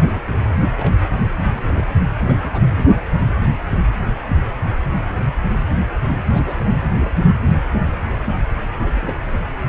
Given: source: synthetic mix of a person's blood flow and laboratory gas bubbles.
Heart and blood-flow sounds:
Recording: Doppler ultrasound of blood flow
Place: precordium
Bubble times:
0.01-0.53 s: bubbles
0.60-0.63 s: bubbles
0.74-0.95 s: bubbles
1.54-1.94 s: bubbles
2.23-2.63 s: bubbles
2.69-2.84 s: bubbles
6.30-6.62 s: bubbles
6.66-6.72 s: bubbles
6.92-7.10 s: bubbles
8.86-8.90 s: bubbles
8.94-9.16 s: bubbles
9.20-9.26 s: bubbles
From the record:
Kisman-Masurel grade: 221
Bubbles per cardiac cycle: several, 3 to 8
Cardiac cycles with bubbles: 10 to 50%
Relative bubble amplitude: barely perceptible (0.100 to 0.250)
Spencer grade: 2 (many but less than half of the cardiac periods contain bubble signals, singularly or in groups)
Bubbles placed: anywhere in the cardiac cycle

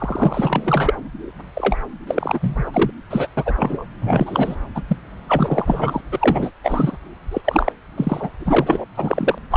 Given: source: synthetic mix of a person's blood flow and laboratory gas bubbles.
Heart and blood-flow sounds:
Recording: Doppler ultrasound of blood flow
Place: subclavian vein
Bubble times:
0.00-0.94 s: bubbles
1.55-1.76 s: bubbles
2.07-2.91 s: bubbles
3.10-3.28 s: bubbles
3.37-3.85 s: bubbles
4.00-4.56 s: bubbles
4.75-4.82 s: bubbles
4.88-4.96 s: bubbles
5.27-6.01 s: bubbles
6.12-6.50 s: bubbles
6.64-6.97 s: bubbles
7.31-7.41 s: bubbles
7.44-7.72 s: bubbles
7.97-8.30 s: bubbles
8.39-8.86 s: bubbles
8.96-9.38 s: bubbles
9.51-9.57 s: bubbles
From the record:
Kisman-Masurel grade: 332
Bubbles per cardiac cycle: rolling drumbeat, 9 or more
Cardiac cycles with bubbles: 50 to 99%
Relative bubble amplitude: moderate (0.250 to 0.450)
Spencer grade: 3 (all of the cardiac periods contain showers or single bubble signals, but not dominating or overriding the cardiac motion signals)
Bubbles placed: anywhere in the cardiac cycle

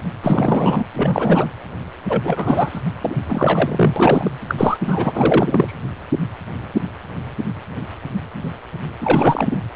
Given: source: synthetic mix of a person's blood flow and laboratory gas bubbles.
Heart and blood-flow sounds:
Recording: Doppler ultrasound of blood flow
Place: precordium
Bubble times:
0.23-0.84 s: bubbles
0.93-1.50 s: bubbles
2.07-2.82 s: bubbles
3.01-3.15 s: bubbles
3.27-4.31 s: bubbles
4.48-4.55 s: bubbles
4.58-4.78 s: bubbles
4.83-5.12 s: bubbles
5.15-5.73 s: bubbles
9.01-9.46 s: bubbles
9.50-9.60 s: bubbles
From the record:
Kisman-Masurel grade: 333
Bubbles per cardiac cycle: rolling drumbeat, 9 or more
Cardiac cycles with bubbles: 50 to 99%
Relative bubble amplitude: loud (0.450 to 0.775)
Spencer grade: 3 (all of the cardiac periods contain showers or single bubble signals, but not dominating or overriding the cardiac motion signals)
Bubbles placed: anywhere in the cardiac cycle

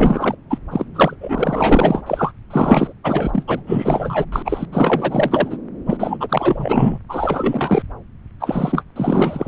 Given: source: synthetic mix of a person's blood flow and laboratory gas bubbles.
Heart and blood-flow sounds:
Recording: Doppler ultrasound of blood flow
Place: subclavian vein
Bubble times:
0.00-0.35 s: bubbles
0.50-0.58 s: bubbles
0.71-0.85 s: bubbles
0.94-1.16 s: bubbles
1.21-2.02 s: bubbles
2.06-2.32 s: bubbles
2.50-2.92 s: bubbles
3.04-3.44 s: bubbles
3.47-3.60 s: bubbles
3.67-4.25 s: bubbles
4.32-4.66 s: bubbles
4.72-5.58 s: bubbles
5.86-6.17 s: bubbles
6.20-6.99 s: bubbles
7.08-7.83 s: bubbles
8.40-8.83 s: bubbles
8.95-9.48 s: bubbles
From the record:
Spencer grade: 4 (maximum detectable bubble signal sounding continuously throughout systole and diastole of every cardiac period, and overriding the amplitude of the normal cardiac signals)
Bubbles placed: anywhere in the cardiac cycle

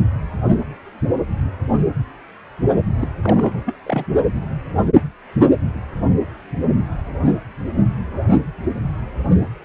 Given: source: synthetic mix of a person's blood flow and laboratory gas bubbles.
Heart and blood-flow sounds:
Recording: Doppler ultrasound of blood flow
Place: precordium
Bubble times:
3.00-3.07 s: bubbles
3.23-3.62 s: bubbles
3.66-3.75 s: bubbles
3.83-4.05 s: bubbles
From the record:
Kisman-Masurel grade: 211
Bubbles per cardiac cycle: several, 3 to 8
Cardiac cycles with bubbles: 1 to 10%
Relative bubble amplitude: barely perceptible (0.100 to 0.250)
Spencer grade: 1 (occasional bubble signal discernible with the cardiac motion signal, with majority of cardiac periods free of bubbles)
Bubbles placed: only in the low amplitude regions of the cardiac cycle

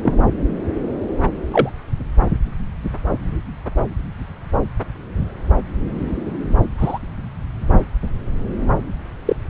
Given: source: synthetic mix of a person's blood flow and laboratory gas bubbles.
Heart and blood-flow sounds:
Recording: Doppler ultrasound of blood flow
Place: subclavian vein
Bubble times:
0.02-0.14 s: bubbles
1.52-1.69 s: bubbles
6.77-6.99 s: bubbles
9.25-9.36 s: bubbles
From the record:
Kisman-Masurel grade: 123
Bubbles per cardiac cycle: 1 to 2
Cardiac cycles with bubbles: 10 to 50%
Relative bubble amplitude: loud (0.450 to 0.775)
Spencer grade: 2 (many but less than half of the cardiac periods contain bubble signals, singularly or in groups)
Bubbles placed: anywhere in the cardiac cycle

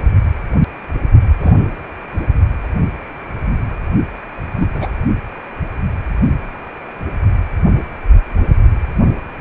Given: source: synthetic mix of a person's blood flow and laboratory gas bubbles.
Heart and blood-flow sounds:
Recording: Doppler ultrasound of blood flow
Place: precordium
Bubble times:
1.40-1.54 s: bubbles
4.54-4.96 s: bubbles
From the record:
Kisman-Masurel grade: 122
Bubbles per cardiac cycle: 1 to 2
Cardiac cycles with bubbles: 10 to 50%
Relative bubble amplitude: moderate (0.250 to 0.450)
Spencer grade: 2 (many but less than half of the cardiac periods contain bubble signals, singularly or in groups)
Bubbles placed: only in the low amplitude regions of the cardiac cycle

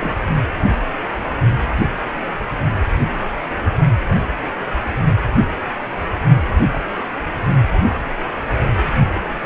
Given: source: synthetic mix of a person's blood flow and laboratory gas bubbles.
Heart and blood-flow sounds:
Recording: Doppler ultrasound of blood flow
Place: precordium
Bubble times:
0.00-0.15 s: bubbles
From the record:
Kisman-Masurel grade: 112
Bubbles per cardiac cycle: 1 to 2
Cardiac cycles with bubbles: 1 to 10%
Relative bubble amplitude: moderate (0.250 to 0.450)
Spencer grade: 1 (occasional bubble signal discernible with the cardiac motion signal, with majority of cardiac periods free of bubbles)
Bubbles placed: anywhere in the cardiac cycle

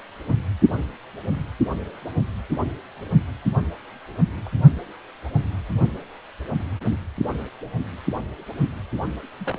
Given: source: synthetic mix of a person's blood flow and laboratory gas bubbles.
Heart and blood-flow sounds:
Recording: Doppler ultrasound of blood flow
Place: precordium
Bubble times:
4.45-4.48 s: bubbles
9.40-9.59 s: bubbles
From the record:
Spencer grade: 2 (many but less than half of the cardiac periods contain bubble signals, singularly or in groups)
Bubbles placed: only in the low amplitude regions of the cardiac cycle

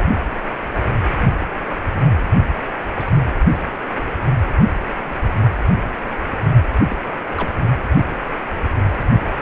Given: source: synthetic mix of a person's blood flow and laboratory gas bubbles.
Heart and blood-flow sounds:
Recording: Doppler ultrasound of blood flow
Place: precordium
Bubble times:
2.99-3.11 s: bubbles
6.89-6.96 s: bubbles
7.37-7.50 s: bubbles
From the record:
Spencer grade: 2 (many but less than half of the cardiac periods contain bubble signals, singularly or in groups)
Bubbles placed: anywhere in the cardiac cycle

